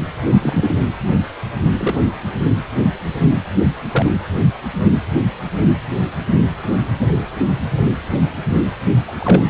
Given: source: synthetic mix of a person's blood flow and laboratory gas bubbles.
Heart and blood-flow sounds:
Doppler ultrasound of blood flow; precordium
0.42-0.78 s: bubbles
1.77-1.96 s: bubbles
3.07-3.13 s: bubbles
3.92-4.06 s: bubbles
9.08-9.12 s: bubbles
9.19-9.45 s: bubbles
From the record:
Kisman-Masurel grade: 122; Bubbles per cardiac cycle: 1 to 2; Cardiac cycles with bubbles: 10 to 50%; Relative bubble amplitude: moderate (0.250 to 0.450); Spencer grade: 2 (many but less than half of the cardiac periods contain bubble signals, singularly or in groups); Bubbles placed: anywhere in the cardiac cycle

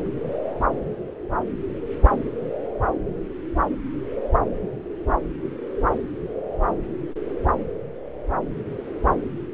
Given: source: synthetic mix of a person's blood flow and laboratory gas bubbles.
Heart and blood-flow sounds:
Doppler ultrasound of blood flow; subclavian vein
no bubbles
From the record:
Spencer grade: 0 (complete lack of bubble signals)

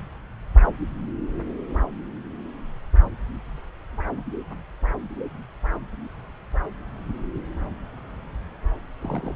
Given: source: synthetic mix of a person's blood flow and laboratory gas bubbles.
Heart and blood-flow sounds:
Doppler ultrasound of blood flow; subclavian vein
9.01-9.36 s: bubbles
From the record:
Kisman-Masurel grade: 111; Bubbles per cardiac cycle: 1 to 2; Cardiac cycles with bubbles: 1 to 10%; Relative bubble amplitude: barely perceptible (0.100 to 0.250); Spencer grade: 1 (occasional bubble signal discernible with the cardiac motion signal, with majority of cardiac periods free of bubbles); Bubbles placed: anywhere in the cardiac cycle

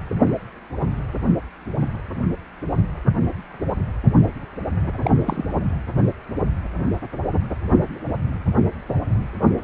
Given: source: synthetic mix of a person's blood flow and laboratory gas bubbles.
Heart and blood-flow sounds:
Doppler ultrasound of blood flow; precordium
5.02-5.11 s: bubbles
5.25-5.62 s: bubbles
From the record:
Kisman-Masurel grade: 212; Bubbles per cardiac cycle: several, 3 to 8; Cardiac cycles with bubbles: 1 to 10%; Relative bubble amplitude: moderate (0.250 to 0.450); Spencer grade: 1 (occasional bubble signal discernible with the cardiac motion signal, with majority of cardiac periods free of bubbles); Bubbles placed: anywhere in the cardiac cycle

